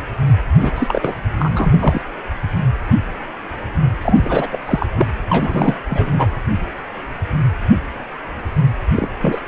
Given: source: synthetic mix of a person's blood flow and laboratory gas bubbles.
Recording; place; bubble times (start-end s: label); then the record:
Doppler ultrasound of blood flow; precordium
0.60-0.71 s: bubbles
0.75-1.15 s: bubbles
1.39-2.02 s: bubbles
4.02-4.48 s: bubbles
4.51-4.58 s: bubbles
4.66-4.86 s: bubbles
4.96-5.07 s: bubbles
5.29-5.79 s: bubbles
5.90-6.28 s: bubbles
8.96-9.09 s: bubbles
9.21-9.41 s: bubbles
9.46-9.48 s: bubbles
From the record:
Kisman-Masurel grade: 333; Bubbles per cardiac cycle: rolling drumbeat, 9 or more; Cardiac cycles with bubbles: 50 to 99%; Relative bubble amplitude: loud (0.450 to 0.775); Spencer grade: 3 (all of the cardiac periods contain showers or single bubble signals, but not dominating or overriding the cardiac motion signals); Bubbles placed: anywhere in the cardiac cycle